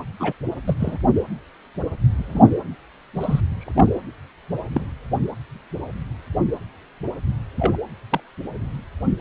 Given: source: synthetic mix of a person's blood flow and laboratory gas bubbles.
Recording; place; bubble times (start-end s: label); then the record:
Doppler ultrasound of blood flow; precordium
0.20-0.33 s: bubbles
0.67-0.74 s: bubbles
0.79-0.98 s: bubbles
2.08-2.52 s: bubbles
3.16-3.40 s: bubbles
3.60-3.91 s: bubbles
4.74-4.86 s: bubbles
7.56-7.76 s: bubbles
8.10-8.20 s: bubbles
From the record:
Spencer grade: 2 (many but less than half of the cardiac periods contain bubble signals, singularly or in groups); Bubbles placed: anywhere in the cardiac cycle